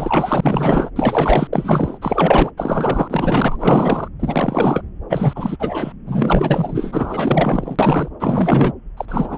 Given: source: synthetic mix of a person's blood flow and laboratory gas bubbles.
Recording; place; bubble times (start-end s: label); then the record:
Doppler ultrasound of blood flow; subclavian vein
0.00-0.90 s: bubbles
0.96-1.48 s: bubbles
1.53-1.99 s: bubbles
2.01-2.50 s: bubbles
2.57-4.08 s: bubbles
4.20-4.82 s: bubbles
5.09-5.57 s: bubbles
5.59-5.92 s: bubbles
6.06-7.76 s: bubbles
7.79-8.08 s: bubbles
8.20-8.72 s: bubbles
8.97-9.05 s: bubbles
9.08-9.38 s: bubbles
From the record:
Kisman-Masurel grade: 444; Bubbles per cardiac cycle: continuous sound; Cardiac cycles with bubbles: 100%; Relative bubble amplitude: maximal (0.775 to 0.999); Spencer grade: 4 (maximum detectable bubble signal sounding continuously throughout systole and diastole of every cardiac period, and overriding the amplitude of the normal cardiac signals); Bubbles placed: anywhere in the cardiac cycle